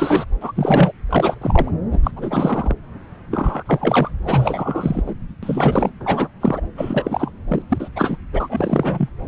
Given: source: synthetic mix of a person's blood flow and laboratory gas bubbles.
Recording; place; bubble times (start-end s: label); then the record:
Doppler ultrasound of blood flow; subclavian vein
0.00-0.24 s: bubbles
0.41-0.52 s: bubbles
0.55-0.92 s: bubbles
1.09-1.72 s: bubbles
1.92-1.99 s: bubbles
2.03-2.11 s: bubbles
2.16-2.74 s: bubbles
3.31-3.63 s: bubbles
3.65-4.11 s: bubbles
4.24-5.02 s: bubbles
5.06-5.15 s: bubbles
5.42-5.91 s: bubbles
5.99-6.28 s: bubbles
6.41-6.60 s: bubbles
6.77-7.31 s: bubbles
7.47-7.62 s: bubbles
7.70-7.89 s: bubbles
7.96-8.17 s: bubbles
8.32-9.09 s: bubbles
From the record:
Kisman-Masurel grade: 343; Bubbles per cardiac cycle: rolling drumbeat, 9 or more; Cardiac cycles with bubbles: 100%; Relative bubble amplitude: loud (0.450 to 0.775); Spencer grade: 3 (all of the cardiac periods contain showers or single bubble signals, but not dominating or overriding the cardiac motion signals); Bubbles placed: anywhere in the cardiac cycle